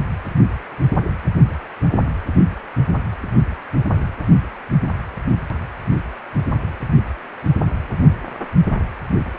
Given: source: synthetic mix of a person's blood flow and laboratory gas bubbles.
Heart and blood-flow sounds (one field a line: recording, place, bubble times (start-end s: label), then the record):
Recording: Doppler ultrasound of blood flow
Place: precordium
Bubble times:
no bubbles
From the record:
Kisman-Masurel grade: 000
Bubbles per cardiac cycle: 0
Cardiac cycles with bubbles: 0%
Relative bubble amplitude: no bubbles discernible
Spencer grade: 0 (complete lack of bubble signals)